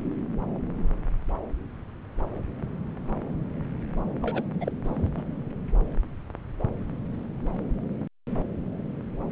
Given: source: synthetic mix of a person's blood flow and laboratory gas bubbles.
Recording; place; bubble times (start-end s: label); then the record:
Doppler ultrasound of blood flow; subclavian vein
4.22-4.42 s: bubbles
4.60-4.72 s: bubbles
4.84-5.08 s: bubbles
5.17-5.22 s: bubbles
From the record:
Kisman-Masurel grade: 221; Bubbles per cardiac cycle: several, 3 to 8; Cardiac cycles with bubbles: 10 to 50%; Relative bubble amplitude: barely perceptible (0.100 to 0.250); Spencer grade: 2 (many but less than half of the cardiac periods contain bubble signals, singularly or in groups); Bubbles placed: anywhere in the cardiac cycle